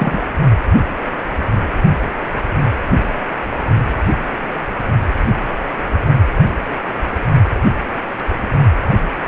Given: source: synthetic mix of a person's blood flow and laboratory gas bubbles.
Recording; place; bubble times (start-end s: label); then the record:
Doppler ultrasound of blood flow; precordium
0.00-0.20 s: bubbles
From the record:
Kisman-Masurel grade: 212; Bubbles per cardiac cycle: several, 3 to 8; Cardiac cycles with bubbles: 1 to 10%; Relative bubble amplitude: moderate (0.250 to 0.450); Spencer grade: 1 (occasional bubble signal discernible with the cardiac motion signal, with majority of cardiac periods free of bubbles); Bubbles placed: only in the low amplitude regions of the cardiac cycle